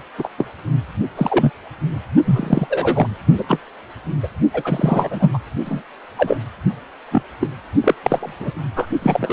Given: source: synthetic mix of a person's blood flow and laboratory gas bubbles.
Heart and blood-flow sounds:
Doppler ultrasound of blood flow; precordium
0.18-0.28 s: bubbles
0.37-0.48 s: bubbles
1.17-1.50 s: bubbles
2.25-2.67 s: bubbles
2.69-3.07 s: bubbles
3.38-3.44 s: bubbles
3.48-3.60 s: bubbles
4.22-4.28 s: bubbles
4.53-5.30 s: bubbles
5.33-5.38 s: bubbles
5.65-5.83 s: bubbles
6.17-6.38 s: bubbles
7.11-7.22 s: bubbles
7.40-7.50 s: bubbles
7.80-7.95 s: bubbles
8.03-8.34 s: bubbles
8.39-8.52 s: bubbles
8.76-8.88 s: bubbles
9.02-9.33 s: bubbles
From the record:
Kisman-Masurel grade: 243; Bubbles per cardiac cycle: several, 3 to 8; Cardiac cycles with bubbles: 100%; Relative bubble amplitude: loud (0.450 to 0.775); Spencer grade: 3 (all of the cardiac periods contain showers or single bubble signals, but not dominating or overriding the cardiac motion signals); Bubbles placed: only in the low amplitude regions of the cardiac cycle

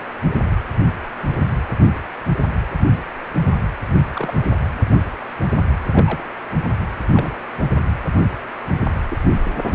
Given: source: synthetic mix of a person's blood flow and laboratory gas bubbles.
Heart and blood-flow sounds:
Doppler ultrasound of blood flow; precordium
0.00-0.05 s: bubbles
0.49-0.57 s: bubbles
4.12-4.42 s: bubbles
5.90-6.25 s: bubbles
7.12-7.37 s: bubbles
9.10-9.17 s: bubbles
9.63-9.75 s: bubbles
From the record:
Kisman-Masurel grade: 121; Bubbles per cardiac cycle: 1 to 2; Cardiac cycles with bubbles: 10 to 50%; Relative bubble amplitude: barely perceptible (0.100 to 0.250); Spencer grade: 2 (many but less than half of the cardiac periods contain bubble signals, singularly or in groups); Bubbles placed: anywhere in the cardiac cycle

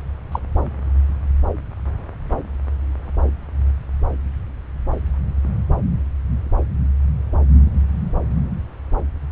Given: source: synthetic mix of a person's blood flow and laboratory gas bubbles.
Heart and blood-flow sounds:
Doppler ultrasound of blood flow; subclavian vein
0.32-0.39 s: bubbles
From the record:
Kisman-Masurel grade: 112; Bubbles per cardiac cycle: 1 to 2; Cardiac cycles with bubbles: 1 to 10%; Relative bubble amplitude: moderate (0.250 to 0.450); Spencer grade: 1 (occasional bubble signal discernible with the cardiac motion signal, with majority of cardiac periods free of bubbles); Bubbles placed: anywhere in the cardiac cycle

